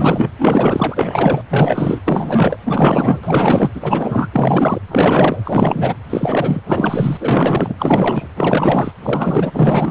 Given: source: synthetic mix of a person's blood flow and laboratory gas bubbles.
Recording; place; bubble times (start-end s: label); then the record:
Doppler ultrasound of blood flow; precordium
0.00-0.29 s: bubbles
0.39-1.42 s: bubbles
1.49-2.01 s: bubbles
2.05-2.58 s: bubbles
2.65-3.70 s: bubbles
3.75-4.29 s: bubbles
4.31-4.81 s: bubbles
4.88-5.42 s: bubbles
5.44-5.95 s: bubbles
6.09-6.60 s: bubbles
6.67-7.17 s: bubbles
7.19-7.75 s: bubbles
7.78-8.28 s: bubbles
8.36-8.91 s: bubbles
9.03-9.91 s: bubbles
From the record:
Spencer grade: 4 (maximum detectable bubble signal sounding continuously throughout systole and diastole of every cardiac period, and overriding the amplitude of the normal cardiac signals); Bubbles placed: anywhere in the cardiac cycle